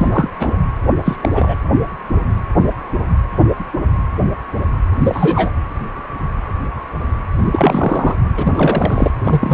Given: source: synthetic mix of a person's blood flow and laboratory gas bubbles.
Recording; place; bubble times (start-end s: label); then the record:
Doppler ultrasound of blood flow; precordium
0.00-0.30 s: bubbles
0.39-0.56 s: bubbles
1.05-1.16 s: bubbles
1.21-1.56 s: bubbles
5.00-5.51 s: bubbles
7.44-8.15 s: bubbles
8.36-9.11 s: bubbles
9.24-9.54 s: bubbles
From the record:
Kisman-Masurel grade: 223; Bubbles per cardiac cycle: several, 3 to 8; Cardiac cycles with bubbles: 10 to 50%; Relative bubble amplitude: loud (0.450 to 0.775); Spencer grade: 2 (many but less than half of the cardiac periods contain bubble signals, singularly or in groups); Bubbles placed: anywhere in the cardiac cycle